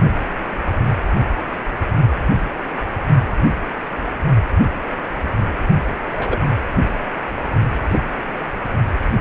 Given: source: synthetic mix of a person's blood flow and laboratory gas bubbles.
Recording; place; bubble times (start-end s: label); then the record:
Doppler ultrasound of blood flow; precordium
6.11-6.49 s: bubbles
7.83-7.99 s: bubbles
From the record:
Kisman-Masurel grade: 122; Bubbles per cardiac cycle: 1 to 2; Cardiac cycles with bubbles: 10 to 50%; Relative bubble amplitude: moderate (0.250 to 0.450); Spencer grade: 2 (many but less than half of the cardiac periods contain bubble signals, singularly or in groups); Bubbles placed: only in the low amplitude regions of the cardiac cycle